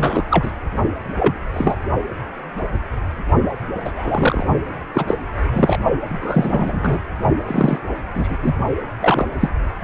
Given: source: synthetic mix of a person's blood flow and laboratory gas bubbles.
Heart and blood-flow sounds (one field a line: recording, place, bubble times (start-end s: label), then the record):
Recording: Doppler ultrasound of blood flow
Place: precordium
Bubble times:
0.00-0.24 s: bubbles
0.30-0.52 s: bubbles
1.19-1.38 s: bubbles
1.53-1.76 s: bubbles
3.85-3.92 s: bubbles
3.96-4.46 s: bubbles
4.94-5.14 s: bubbles
5.51-5.77 s: bubbles
6.08-7.00 s: bubbles
7.46-7.79 s: bubbles
8.14-8.37 s: bubbles
8.41-8.53 s: bubbles
9.00-9.25 s: bubbles
9.40-9.50 s: bubbles
From the record:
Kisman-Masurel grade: 233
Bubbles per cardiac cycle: several, 3 to 8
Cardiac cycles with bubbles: 50 to 99%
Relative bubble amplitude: loud (0.450 to 0.775)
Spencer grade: 3 (all of the cardiac periods contain showers or single bubble signals, but not dominating or overriding the cardiac motion signals)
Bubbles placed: only in the low amplitude regions of the cardiac cycle